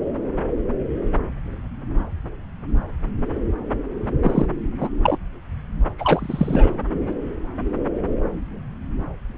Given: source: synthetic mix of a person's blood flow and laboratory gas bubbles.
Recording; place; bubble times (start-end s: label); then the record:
Doppler ultrasound of blood flow; subclavian vein
4.22-4.46 s: bubbles
4.80-4.89 s: bubbles
5.03-5.17 s: bubbles
5.98-6.71 s: bubbles
From the record:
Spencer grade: 2 (many but less than half of the cardiac periods contain bubble signals, singularly or in groups); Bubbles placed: anywhere in the cardiac cycle